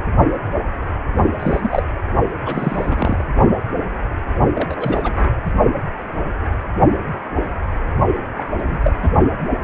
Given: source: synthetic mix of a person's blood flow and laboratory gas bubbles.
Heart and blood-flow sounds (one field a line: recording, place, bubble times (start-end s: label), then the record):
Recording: Doppler ultrasound of blood flow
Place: precordium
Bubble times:
1.39-1.82 s: bubbles
2.46-3.24 s: bubbles
4.54-5.29 s: bubbles
8.36-8.44 s: bubbles
8.58-8.63 s: bubbles
8.67-8.77 s: bubbles
8.82-8.92 s: bubbles
9.02-9.09 s: bubbles
From the record:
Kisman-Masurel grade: 222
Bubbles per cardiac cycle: several, 3 to 8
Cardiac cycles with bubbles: 10 to 50%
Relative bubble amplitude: moderate (0.250 to 0.450)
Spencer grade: 2 (many but less than half of the cardiac periods contain bubble signals, singularly or in groups)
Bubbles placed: only in the low amplitude regions of the cardiac cycle